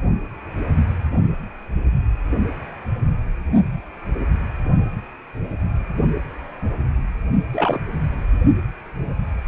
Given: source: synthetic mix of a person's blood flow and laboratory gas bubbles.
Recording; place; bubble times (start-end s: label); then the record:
Doppler ultrasound of blood flow; precordium
7.54-7.79 s: bubbles
From the record:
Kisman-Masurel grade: 222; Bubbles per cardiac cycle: several, 3 to 8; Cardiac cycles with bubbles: 10 to 50%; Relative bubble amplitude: moderate (0.250 to 0.450); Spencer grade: 2 (many but less than half of the cardiac periods contain bubble signals, singularly or in groups); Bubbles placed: only in the low amplitude regions of the cardiac cycle